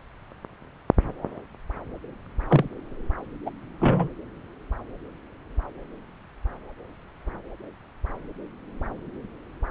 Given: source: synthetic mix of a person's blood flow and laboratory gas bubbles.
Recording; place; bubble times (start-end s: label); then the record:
Doppler ultrasound of blood flow; subclavian vein
2.48-2.69 s: bubbles
3.46-3.50 s: bubbles
3.79-4.09 s: bubbles
From the record:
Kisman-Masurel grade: 122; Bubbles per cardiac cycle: 1 to 2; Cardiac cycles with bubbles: 10 to 50%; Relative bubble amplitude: moderate (0.250 to 0.450); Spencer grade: 2 (many but less than half of the cardiac periods contain bubble signals, singularly or in groups); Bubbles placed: anywhere in the cardiac cycle